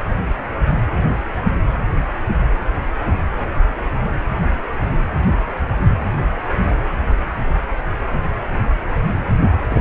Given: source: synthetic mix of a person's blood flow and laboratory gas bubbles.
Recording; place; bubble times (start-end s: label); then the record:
Doppler ultrasound of blood flow; precordium
9.69-9.81 s: bubbles
From the record:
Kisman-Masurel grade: 121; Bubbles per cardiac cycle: 1 to 2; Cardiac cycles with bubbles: 10 to 50%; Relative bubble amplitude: barely perceptible (0.100 to 0.250); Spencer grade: 2 (many but less than half of the cardiac periods contain bubble signals, singularly or in groups); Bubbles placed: anywhere in the cardiac cycle